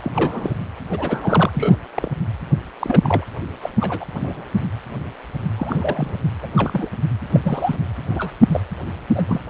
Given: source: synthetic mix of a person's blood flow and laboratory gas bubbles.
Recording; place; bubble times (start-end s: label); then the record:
Doppler ultrasound of blood flow; precordium
0.02-0.12 s: bubbles
0.14-0.56 s: bubbles
0.90-1.51 s: bubbles
1.54-1.78 s: bubbles
1.96-2.09 s: bubbles
2.79-3.25 s: bubbles
3.62-3.69 s: bubbles
3.80-4.05 s: bubbles
4.13-4.46 s: bubbles
5.56-6.16 s: bubbles
6.42-6.47 s: bubbles
6.56-6.89 s: bubbles
7.33-7.40 s: bubbles
7.42-7.77 s: bubbles
8.10-8.31 s: bubbles
8.52-8.61 s: bubbles
9.15-9.22 s: bubbles
9.28-9.40 s: bubbles
From the record:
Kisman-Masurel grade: 232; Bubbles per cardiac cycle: several, 3 to 8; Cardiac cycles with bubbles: 50 to 99%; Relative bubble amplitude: moderate (0.250 to 0.450); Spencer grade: 3 (all of the cardiac periods contain showers or single bubble signals, but not dominating or overriding the cardiac motion signals); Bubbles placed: anywhere in the cardiac cycle